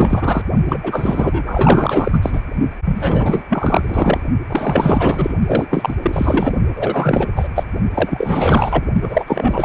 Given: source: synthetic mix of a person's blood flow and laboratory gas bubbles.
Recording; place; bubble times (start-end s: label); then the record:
Doppler ultrasound of blood flow; precordium
0.00-0.43 s: bubbles
0.68-0.79 s: bubbles
0.82-2.19 s: bubbles
2.22-2.40 s: bubbles
2.85-3.43 s: bubbles
3.49-4.20 s: bubbles
4.49-5.34 s: bubbles
5.46-5.95 s: bubbles
6.02-6.54 s: bubbles
6.75-7.27 s: bubbles
7.35-7.48 s: bubbles
7.55-7.63 s: bubbles
7.94-8.84 s: bubbles
9.02-9.65 s: bubbles
From the record:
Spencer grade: 4 (maximum detectable bubble signal sounding continuously throughout systole and diastole of every cardiac period, and overriding the amplitude of the normal cardiac signals); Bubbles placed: only in the low amplitude regions of the cardiac cycle